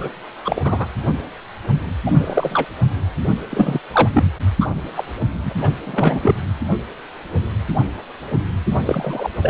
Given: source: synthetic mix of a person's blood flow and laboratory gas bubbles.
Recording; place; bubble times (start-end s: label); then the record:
Doppler ultrasound of blood flow; precordium
0.00-0.08 s: bubbles
0.45-0.60 s: bubbles
0.64-0.88 s: bubbles
2.06-2.67 s: bubbles
3.50-3.79 s: bubbles
3.92-4.09 s: bubbles
4.12-4.31 s: bubbles
4.61-4.68 s: bubbles
4.96-5.04 s: bubbles
5.45-5.53 s: bubbles
5.61-5.69 s: bubbles
5.85-6.35 s: bubbles
8.79-9.30 s: bubbles
9.42-9.50 s: bubbles
From the record:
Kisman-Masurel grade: 233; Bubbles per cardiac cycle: several, 3 to 8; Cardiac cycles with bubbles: 50 to 99%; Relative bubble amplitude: loud (0.450 to 0.775); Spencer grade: 3 (all of the cardiac periods contain showers or single bubble signals, but not dominating or overriding the cardiac motion signals); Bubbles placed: anywhere in the cardiac cycle